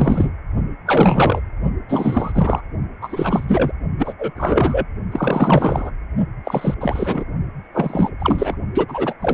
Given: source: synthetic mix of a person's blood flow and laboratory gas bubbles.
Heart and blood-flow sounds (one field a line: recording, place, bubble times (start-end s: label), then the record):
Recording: Doppler ultrasound of blood flow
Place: precordium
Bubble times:
0.00-0.31 s: bubbles
0.86-1.41 s: bubbles
1.89-2.62 s: bubbles
3.01-3.45 s: bubbles
3.48-3.72 s: bubbles
3.98-4.14 s: bubbles
4.19-4.31 s: bubbles
4.36-4.87 s: bubbles
5.12-5.91 s: bubbles
6.45-6.75 s: bubbles
6.80-7.24 s: bubbles
7.74-8.12 s: bubbles
8.19-8.55 s: bubbles
8.73-9.14 s: bubbles
9.21-9.34 s: bubbles
From the record:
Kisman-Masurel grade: 343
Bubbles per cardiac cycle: rolling drumbeat, 9 or more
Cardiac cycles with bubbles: 100%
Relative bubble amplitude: loud (0.450 to 0.775)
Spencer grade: 3 (all of the cardiac periods contain showers or single bubble signals, but not dominating or overriding the cardiac motion signals)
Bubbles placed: only in the low amplitude regions of the cardiac cycle